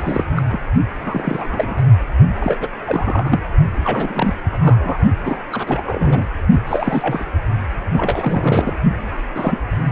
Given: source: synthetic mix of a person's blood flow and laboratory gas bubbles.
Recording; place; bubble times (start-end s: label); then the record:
Doppler ultrasound of blood flow; precordium
0.00-0.25 s: bubbles
0.35-0.43 s: bubbles
0.48-0.60 s: bubbles
1.00-1.82 s: bubbles
2.35-2.58 s: bubbles
2.60-2.68 s: bubbles
2.86-3.41 s: bubbles
3.84-4.34 s: bubbles
4.51-4.98 s: bubbles
5.23-5.38 s: bubbles
5.51-6.26 s: bubbles
6.66-7.25 s: bubbles
7.92-8.72 s: bubbles
9.35-9.58 s: bubbles
9.79-9.87 s: bubbles
From the record:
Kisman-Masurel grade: 342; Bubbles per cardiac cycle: rolling drumbeat, 9 or more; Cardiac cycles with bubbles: 100%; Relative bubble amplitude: moderate (0.250 to 0.450); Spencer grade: 3 (all of the cardiac periods contain showers or single bubble signals, but not dominating or overriding the cardiac motion signals); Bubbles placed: only in the low amplitude regions of the cardiac cycle